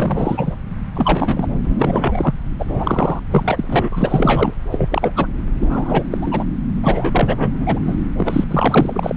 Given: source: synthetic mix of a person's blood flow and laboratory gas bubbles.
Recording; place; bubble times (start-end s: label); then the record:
Doppler ultrasound of blood flow; subclavian vein
0.00-0.56 s: bubbles
0.95-1.48 s: bubbles
1.63-2.34 s: bubbles
2.59-3.19 s: bubbles
3.30-4.54 s: bubbles
4.71-5.11 s: bubbles
5.16-5.27 s: bubbles
5.62-6.04 s: bubbles
6.10-6.18 s: bubbles
6.21-6.45 s: bubbles
6.83-7.79 s: bubbles
7.86-7.97 s: bubbles
8.17-8.44 s: bubbles
8.51-9.16 s: bubbles
From the record:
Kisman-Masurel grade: 343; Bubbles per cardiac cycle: rolling drumbeat, 9 or more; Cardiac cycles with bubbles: 100%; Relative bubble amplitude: loud (0.450 to 0.775); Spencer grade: 3 (all of the cardiac periods contain showers or single bubble signals, but not dominating or overriding the cardiac motion signals); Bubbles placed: anywhere in the cardiac cycle